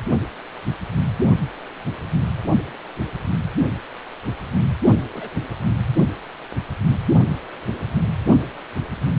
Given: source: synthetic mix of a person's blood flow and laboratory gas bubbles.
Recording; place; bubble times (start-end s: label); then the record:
Doppler ultrasound of blood flow; precordium
5.12-5.29 s: bubbles
From the record:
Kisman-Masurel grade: 121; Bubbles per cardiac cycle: 1 to 2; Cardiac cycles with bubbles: 10 to 50%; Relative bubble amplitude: barely perceptible (0.100 to 0.250); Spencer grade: 2 (many but less than half of the cardiac periods contain bubble signals, singularly or in groups); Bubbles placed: only in the low amplitude regions of the cardiac cycle